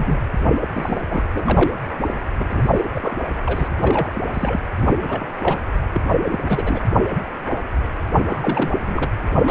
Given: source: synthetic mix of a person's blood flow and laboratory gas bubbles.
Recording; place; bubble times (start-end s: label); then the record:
Doppler ultrasound of blood flow; precordium
0.00-0.19 s: bubbles
0.61-0.66 s: bubbles
0.74-1.02 s: bubbles
1.09-1.24 s: bubbles
1.34-1.74 s: bubbles
2.06-2.14 s: bubbles
2.38-2.85 s: bubbles
2.88-3.16 s: bubbles
3.46-3.69 s: bubbles
3.83-4.23 s: bubbles
4.33-4.60 s: bubbles
4.77-4.91 s: bubbles
4.94-5.31 s: bubbles
5.42-5.60 s: bubbles
5.94-6.00 s: bubbles
6.11-6.40 s: bubbles
6.46-6.81 s: bubbles
8.28-8.71 s: bubbles
8.84-9.09 s: bubbles
9.36-9.51 s: bubbles
From the record:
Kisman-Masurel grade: 332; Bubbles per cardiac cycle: rolling drumbeat, 9 or more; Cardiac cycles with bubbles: 50 to 99%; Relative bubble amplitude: moderate (0.250 to 0.450); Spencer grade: 3 (all of the cardiac periods contain showers or single bubble signals, but not dominating or overriding the cardiac motion signals); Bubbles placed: anywhere in the cardiac cycle